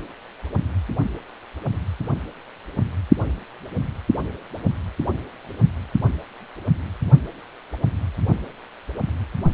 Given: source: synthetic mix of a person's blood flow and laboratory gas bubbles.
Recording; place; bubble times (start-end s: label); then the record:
Doppler ultrasound of blood flow; precordium
no bubbles
From the record:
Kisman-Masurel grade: 000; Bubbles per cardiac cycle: 0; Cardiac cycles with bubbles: 0%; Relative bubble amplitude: no bubbles discernible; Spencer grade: 0 (complete lack of bubble signals)